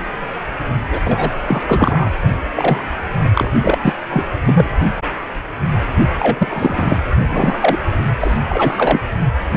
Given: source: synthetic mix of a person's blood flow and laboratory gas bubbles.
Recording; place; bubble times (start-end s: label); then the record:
Doppler ultrasound of blood flow; precordium
0.90-0.99 s: bubbles
1.04-1.30 s: bubbles
1.47-2.11 s: bubbles
2.56-2.85 s: bubbles
3.19-3.30 s: bubbles
3.35-3.50 s: bubbles
3.61-3.78 s: bubbles
3.82-3.96 s: bubbles
4.09-4.25 s: bubbles
4.44-4.73 s: bubbles
6.19-7.00 s: bubbles
7.30-7.78 s: bubbles
8.20-8.37 s: bubbles
8.49-9.02 s: bubbles
From the record:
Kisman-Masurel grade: 333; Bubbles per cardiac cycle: rolling drumbeat, 9 or more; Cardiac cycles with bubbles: 50 to 99%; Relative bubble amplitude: loud (0.450 to 0.775); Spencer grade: 3 (all of the cardiac periods contain showers or single bubble signals, but not dominating or overriding the cardiac motion signals); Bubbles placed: only in the low amplitude regions of the cardiac cycle